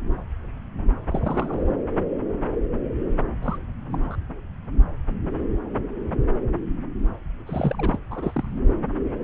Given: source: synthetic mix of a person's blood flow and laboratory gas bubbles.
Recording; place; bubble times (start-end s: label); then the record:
Doppler ultrasound of blood flow; subclavian vein
1.10-1.75 s: bubbles
3.42-3.57 s: bubbles
3.89-4.16 s: bubbles
7.46-7.99 s: bubbles
8.10-8.32 s: bubbles
8.35-8.57 s: bubbles
From the record:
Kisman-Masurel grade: 221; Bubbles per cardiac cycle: several, 3 to 8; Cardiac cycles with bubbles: 10 to 50%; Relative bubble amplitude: barely perceptible (0.100 to 0.250); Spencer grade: 2 (many but less than half of the cardiac periods contain bubble signals, singularly or in groups); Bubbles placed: anywhere in the cardiac cycle